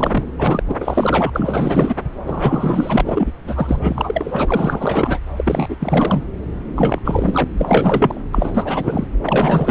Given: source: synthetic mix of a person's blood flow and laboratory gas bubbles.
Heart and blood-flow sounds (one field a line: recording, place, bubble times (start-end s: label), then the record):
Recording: Doppler ultrasound of blood flow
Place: subclavian vein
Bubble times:
0.00-0.27 s: bubbles
0.38-0.63 s: bubbles
0.68-1.96 s: bubbles
2.25-3.31 s: bubbles
3.44-5.20 s: bubbles
5.36-6.23 s: bubbles
6.75-7.00 s: bubbles
7.04-7.45 s: bubbles
7.58-8.21 s: bubbles
8.33-9.06 s: bubbles
9.24-9.71 s: bubbles
From the record:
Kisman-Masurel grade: 444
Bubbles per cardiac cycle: continuous sound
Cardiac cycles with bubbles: 100%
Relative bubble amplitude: maximal (0.775 to 0.999)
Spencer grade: 4 (maximum detectable bubble signal sounding continuously throughout systole and diastole of every cardiac period, and overriding the amplitude of the normal cardiac signals)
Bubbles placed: anywhere in the cardiac cycle